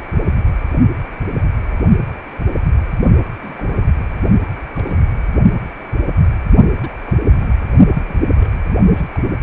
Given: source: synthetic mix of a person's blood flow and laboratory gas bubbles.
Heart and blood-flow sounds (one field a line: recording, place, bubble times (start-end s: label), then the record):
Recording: Doppler ultrasound of blood flow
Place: precordium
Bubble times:
3.39-3.85 s: bubbles
4.73-5.01 s: bubbles
6.76-6.80 s: bubbles
6.82-6.89 s: bubbles
7.05-7.17 s: bubbles
7.19-7.48 s: bubbles
7.91-8.30 s: bubbles
8.36-8.48 s: bubbles
8.67-8.75 s: bubbles
8.91-9.03 s: bubbles
9.15-9.20 s: bubbles
From the record:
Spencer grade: 2 (many but less than half of the cardiac periods contain bubble signals, singularly or in groups)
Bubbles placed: only in the low amplitude regions of the cardiac cycle